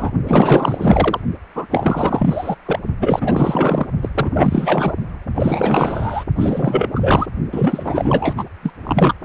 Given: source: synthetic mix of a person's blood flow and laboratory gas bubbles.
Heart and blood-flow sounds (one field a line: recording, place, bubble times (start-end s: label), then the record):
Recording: Doppler ultrasound of blood flow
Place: precordium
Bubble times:
0.00-0.11 s: bubbles
0.27-1.20 s: bubbles
1.55-2.55 s: bubbles
2.65-2.79 s: bubbles
3.00-3.86 s: bubbles
4.02-4.09 s: bubbles
4.14-4.31 s: bubbles
4.33-4.95 s: bubbles
5.35-6.24 s: bubbles
6.37-6.90 s: bubbles
6.95-7.27 s: bubbles
7.52-8.43 s: bubbles
8.62-8.72 s: bubbles
8.83-9.13 s: bubbles
From the record:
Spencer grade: 4 (maximum detectable bubble signal sounding continuously throughout systole and diastole of every cardiac period, and overriding the amplitude of the normal cardiac signals)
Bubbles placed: only in the low amplitude regions of the cardiac cycle